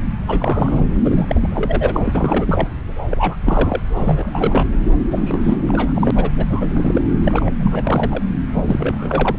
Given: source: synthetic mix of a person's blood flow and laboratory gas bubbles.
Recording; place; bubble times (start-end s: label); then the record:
Doppler ultrasound of blood flow; subclavian vein
0.27-0.80 s: bubbles
1.04-2.69 s: bubbles
3.10-3.36 s: bubbles
3.44-3.81 s: bubbles
3.94-4.65 s: bubbles
5.10-6.11 s: bubbles
6.15-6.30 s: bubbles
6.37-6.46 s: bubbles
6.49-7.02 s: bubbles
7.24-7.50 s: bubbles
7.60-8.23 s: bubbles
8.53-9.36 s: bubbles
From the record:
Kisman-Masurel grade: 342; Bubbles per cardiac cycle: rolling drumbeat, 9 or more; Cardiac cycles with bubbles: 100%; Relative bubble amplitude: moderate (0.250 to 0.450); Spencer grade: 3 (all of the cardiac periods contain showers or single bubble signals, but not dominating or overriding the cardiac motion signals); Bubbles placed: anywhere in the cardiac cycle